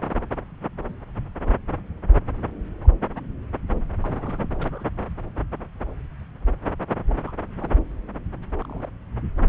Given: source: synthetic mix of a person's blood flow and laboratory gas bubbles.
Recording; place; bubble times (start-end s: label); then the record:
Doppler ultrasound of blood flow; subclavian vein
0.88-0.93 s: bubbles
2.83-2.87 s: bubbles
4.03-4.48 s: bubbles
4.59-4.84 s: bubbles
7.07-7.33 s: bubbles
7.60-7.70 s: bubbles
8.57-8.88 s: bubbles
From the record:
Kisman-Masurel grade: 121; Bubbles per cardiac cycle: 1 to 2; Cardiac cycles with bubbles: 10 to 50%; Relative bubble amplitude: barely perceptible (0.100 to 0.250); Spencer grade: 2 (many but less than half of the cardiac periods contain bubble signals, singularly or in groups); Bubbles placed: anywhere in the cardiac cycle